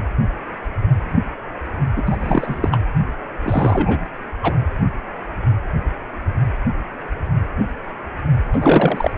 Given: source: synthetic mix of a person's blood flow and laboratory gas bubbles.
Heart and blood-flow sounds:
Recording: Doppler ultrasound of blood flow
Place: precordium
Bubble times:
1.96-2.02 s: bubbles
2.06-2.17 s: bubbles
2.20-2.81 s: bubbles
3.43-4.01 s: bubbles
4.42-4.56 s: bubbles
8.53-9.11 s: bubbles
From the record:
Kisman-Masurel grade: 222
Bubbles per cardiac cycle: several, 3 to 8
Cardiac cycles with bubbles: 10 to 50%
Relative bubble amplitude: moderate (0.250 to 0.450)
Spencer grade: 2 (many but less than half of the cardiac periods contain bubble signals, singularly or in groups)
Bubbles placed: anywhere in the cardiac cycle

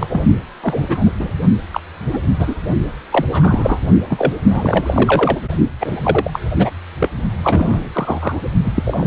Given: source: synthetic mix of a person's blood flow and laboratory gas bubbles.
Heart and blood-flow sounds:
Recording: Doppler ultrasound of blood flow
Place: precordium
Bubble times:
0.00-0.07 s: bubbles
0.10-0.21 s: bubbles
0.60-1.12 s: bubbles
1.19-1.31 s: bubbles
1.71-1.81 s: bubbles
2.12-2.19 s: bubbles
2.39-2.55 s: bubbles
3.12-3.25 s: bubbles
3.31-3.79 s: bubbles
4.10-4.33 s: bubbles
4.49-5.38 s: bubbles
5.80-6.40 s: bubbles
6.57-6.71 s: bubbles
7.00-7.09 s: bubbles
7.43-7.89 s: bubbles
7.94-8.38 s: bubbles
8.64-9.07 s: bubbles
From the record:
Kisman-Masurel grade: 233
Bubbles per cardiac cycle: several, 3 to 8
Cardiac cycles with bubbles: 50 to 99%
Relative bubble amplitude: loud (0.450 to 0.775)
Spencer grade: 3 (all of the cardiac periods contain showers or single bubble signals, but not dominating or overriding the cardiac motion signals)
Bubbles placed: only in the low amplitude regions of the cardiac cycle

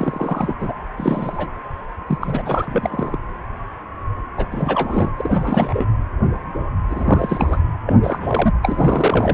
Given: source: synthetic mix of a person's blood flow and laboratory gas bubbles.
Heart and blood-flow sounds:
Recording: Doppler ultrasound of blood flow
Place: precordium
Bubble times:
0.00-0.54 s: bubbles
0.59-0.72 s: bubbles
0.97-1.49 s: bubbles
2.06-2.19 s: bubbles
2.21-3.19 s: bubbles
4.37-4.46 s: bubbles
4.50-5.12 s: bubbles
5.17-5.86 s: bubbles
6.90-7.60 s: bubbles
7.86-8.52 s: bubbles
8.62-9.34 s: bubbles
From the record:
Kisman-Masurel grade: 332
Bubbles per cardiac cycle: rolling drumbeat, 9 or more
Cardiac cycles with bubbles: 50 to 99%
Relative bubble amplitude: moderate (0.250 to 0.450)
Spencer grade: 3 (all of the cardiac periods contain showers or single bubble signals, but not dominating or overriding the cardiac motion signals)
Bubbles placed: anywhere in the cardiac cycle

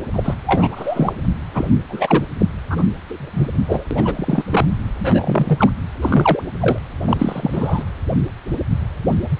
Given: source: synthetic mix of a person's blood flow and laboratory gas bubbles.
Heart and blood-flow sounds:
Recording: Doppler ultrasound of blood flow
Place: precordium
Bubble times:
0.13-0.34 s: bubbles
0.46-1.12 s: bubbles
1.54-1.65 s: bubbles
1.88-2.23 s: bubbles
2.39-2.46 s: bubbles
2.70-2.89 s: bubbles
3.08-3.50 s: bubbles
3.67-3.84 s: bubbles
3.91-4.44 s: bubbles
4.50-4.66 s: bubbles
4.99-5.70 s: bubbles
6.01-6.42 s: bubbles
6.60-6.79 s: bubbles
7.07-7.84 s: bubbles
From the record:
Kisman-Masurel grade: 243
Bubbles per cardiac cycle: several, 3 to 8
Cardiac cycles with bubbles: 100%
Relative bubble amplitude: loud (0.450 to 0.775)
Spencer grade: 3 (all of the cardiac periods contain showers or single bubble signals, but not dominating or overriding the cardiac motion signals)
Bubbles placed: anywhere in the cardiac cycle

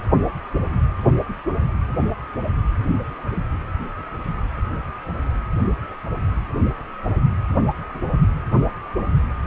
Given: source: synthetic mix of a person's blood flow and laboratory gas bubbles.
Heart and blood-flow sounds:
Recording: Doppler ultrasound of blood flow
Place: precordium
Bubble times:
no bubbles
From the record:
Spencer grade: 0 (complete lack of bubble signals)

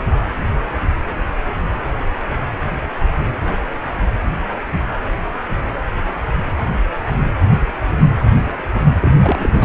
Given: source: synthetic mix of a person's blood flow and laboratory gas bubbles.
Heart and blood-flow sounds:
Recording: Doppler ultrasound of blood flow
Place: precordium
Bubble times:
9.01-9.11 s: bubbles
9.20-9.65 s: bubbles
From the record:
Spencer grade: 2 (many but less than half of the cardiac periods contain bubble signals, singularly or in groups)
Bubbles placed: anywhere in the cardiac cycle

